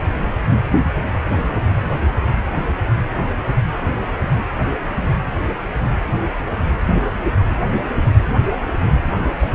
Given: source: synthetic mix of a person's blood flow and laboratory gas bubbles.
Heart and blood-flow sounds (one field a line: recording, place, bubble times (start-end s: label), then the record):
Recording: Doppler ultrasound of blood flow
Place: precordium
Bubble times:
1.26-1.41 s: bubbles
1.69-1.91 s: bubbles
9.40-9.47 s: bubbles
From the record:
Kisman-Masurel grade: 121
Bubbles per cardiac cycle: 1 to 2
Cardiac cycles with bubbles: 10 to 50%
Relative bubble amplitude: barely perceptible (0.100 to 0.250)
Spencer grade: 2 (many but less than half of the cardiac periods contain bubble signals, singularly or in groups)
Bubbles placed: anywhere in the cardiac cycle